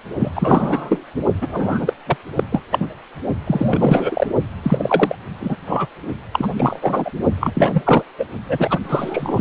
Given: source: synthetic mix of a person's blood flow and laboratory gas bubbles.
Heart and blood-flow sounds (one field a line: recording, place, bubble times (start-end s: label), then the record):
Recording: Doppler ultrasound of blood flow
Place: precordium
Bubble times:
0.00-0.03 s: bubbles
0.19-1.04 s: bubbles
1.41-1.93 s: bubbles
2.06-2.17 s: bubbles
2.35-2.44 s: bubbles
2.51-2.63 s: bubbles
2.70-2.86 s: bubbles
3.46-4.27 s: bubbles
4.63-5.16 s: bubbles
5.40-5.57 s: bubbles
5.67-5.88 s: bubbles
6.33-6.48 s: bubbles
6.57-6.79 s: bubbles
6.82-7.11 s: bubbles
7.40-7.52 s: bubbles
7.54-8.04 s: bubbles
8.18-8.25 s: bubbles
8.48-8.79 s: bubbles
8.83-9.41 s: bubbles
From the record:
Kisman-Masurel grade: 343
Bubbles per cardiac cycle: rolling drumbeat, 9 or more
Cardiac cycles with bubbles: 100%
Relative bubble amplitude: loud (0.450 to 0.775)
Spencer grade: 3 (all of the cardiac periods contain showers or single bubble signals, but not dominating or overriding the cardiac motion signals)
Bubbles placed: only in the low amplitude regions of the cardiac cycle